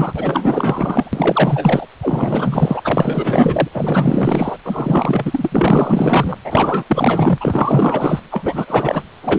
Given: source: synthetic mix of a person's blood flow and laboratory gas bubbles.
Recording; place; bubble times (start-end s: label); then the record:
Doppler ultrasound of blood flow; precordium
0.00-0.13 s: bubbles
0.16-1.86 s: bubbles
2.02-2.81 s: bubbles
2.84-3.69 s: bubbles
3.74-4.57 s: bubbles
4.64-6.36 s: bubbles
6.44-6.84 s: bubbles
6.88-8.20 s: bubbles
8.31-9.04 s: bubbles
9.22-9.39 s: bubbles
From the record:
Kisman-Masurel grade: 444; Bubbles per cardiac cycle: continuous sound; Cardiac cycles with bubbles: 100%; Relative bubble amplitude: maximal (0.775 to 0.999); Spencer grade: 4 (maximum detectable bubble signal sounding continuously throughout systole and diastole of every cardiac period, and overriding the amplitude of the normal cardiac signals); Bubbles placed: anywhere in the cardiac cycle